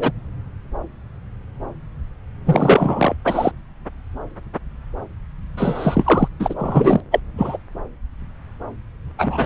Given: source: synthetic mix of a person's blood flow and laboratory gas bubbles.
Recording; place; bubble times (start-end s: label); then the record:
Doppler ultrasound of blood flow; subclavian vein
0.00-0.11 s: bubbles
2.45-3.14 s: bubbles
3.25-3.52 s: bubbles
5.57-6.28 s: bubbles
6.39-6.54 s: bubbles
6.58-7.00 s: bubbles
7.11-7.20 s: bubbles
7.38-7.57 s: bubbles
9.18-9.46 s: bubbles
From the record:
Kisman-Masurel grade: 333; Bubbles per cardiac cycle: rolling drumbeat, 9 or more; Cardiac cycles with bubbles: 50 to 99%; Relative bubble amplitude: loud (0.450 to 0.775); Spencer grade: 3 (all of the cardiac periods contain showers or single bubble signals, but not dominating or overriding the cardiac motion signals); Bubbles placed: anywhere in the cardiac cycle